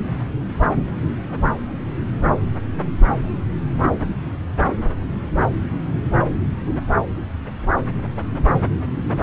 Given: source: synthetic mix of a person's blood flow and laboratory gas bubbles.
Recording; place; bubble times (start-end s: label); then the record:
Doppler ultrasound of blood flow; subclavian vein
0.75-0.83 s: bubbles
From the record:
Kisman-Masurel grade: 112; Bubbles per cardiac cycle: 1 to 2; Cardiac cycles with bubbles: 1 to 10%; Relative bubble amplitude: moderate (0.250 to 0.450); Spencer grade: 1 (occasional bubble signal discernible with the cardiac motion signal, with majority of cardiac periods free of bubbles); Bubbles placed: anywhere in the cardiac cycle